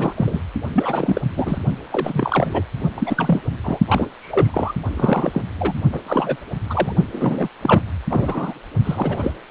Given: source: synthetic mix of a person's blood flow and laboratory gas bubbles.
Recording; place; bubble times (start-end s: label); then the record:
Doppler ultrasound of blood flow; precordium
0.00-0.12 s: bubbles
0.15-0.41 s: bubbles
0.74-1.21 s: bubbles
1.36-1.58 s: bubbles
1.91-2.62 s: bubbles
2.97-3.44 s: bubbles
3.63-3.79 s: bubbles
3.88-4.09 s: bubbles
4.19-4.73 s: bubbles
4.96-5.42 s: bubbles
5.58-5.75 s: bubbles
5.92-6.00 s: bubbles
6.07-6.37 s: bubbles
6.69-6.93 s: bubbles
7.12-7.48 s: bubbles
7.62-7.83 s: bubbles
8.09-8.54 s: bubbles
8.84-9.34 s: bubbles
From the record:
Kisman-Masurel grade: 343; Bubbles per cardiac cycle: rolling drumbeat, 9 or more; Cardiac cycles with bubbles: 100%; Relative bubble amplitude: loud (0.450 to 0.775); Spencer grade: 3 (all of the cardiac periods contain showers or single bubble signals, but not dominating or overriding the cardiac motion signals); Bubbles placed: only in the low amplitude regions of the cardiac cycle